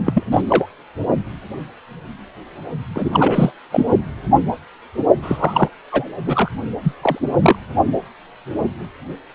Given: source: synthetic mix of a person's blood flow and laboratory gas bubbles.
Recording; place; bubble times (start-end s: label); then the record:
Doppler ultrasound of blood flow; precordium
0.04-0.24 s: bubbles
0.31-0.41 s: bubbles
0.49-0.67 s: bubbles
2.95-3.52 s: bubbles
3.71-3.86 s: bubbles
5.22-5.71 s: bubbles
5.92-6.08 s: bubbles
6.25-6.50 s: bubbles
6.83-6.94 s: bubbles
7.01-7.19 s: bubbles
7.42-7.56 s: bubbles
From the record:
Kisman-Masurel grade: 223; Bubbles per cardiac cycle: several, 3 to 8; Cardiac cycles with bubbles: 10 to 50%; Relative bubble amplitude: loud (0.450 to 0.775); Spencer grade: 2 (many but less than half of the cardiac periods contain bubble signals, singularly or in groups); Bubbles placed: only in the low amplitude regions of the cardiac cycle